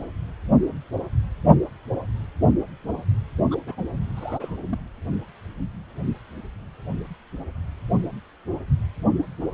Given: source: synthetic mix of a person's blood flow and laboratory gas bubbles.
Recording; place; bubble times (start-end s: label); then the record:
Doppler ultrasound of blood flow; precordium
3.51-3.58 s: bubbles
3.66-3.81 s: bubbles
4.16-4.56 s: bubbles
4.72-4.78 s: bubbles
From the record:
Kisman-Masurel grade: 211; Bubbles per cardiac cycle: several, 3 to 8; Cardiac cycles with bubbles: 1 to 10%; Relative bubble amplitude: barely perceptible (0.100 to 0.250); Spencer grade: 1 (occasional bubble signal discernible with the cardiac motion signal, with majority of cardiac periods free of bubbles); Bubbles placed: only in the low amplitude regions of the cardiac cycle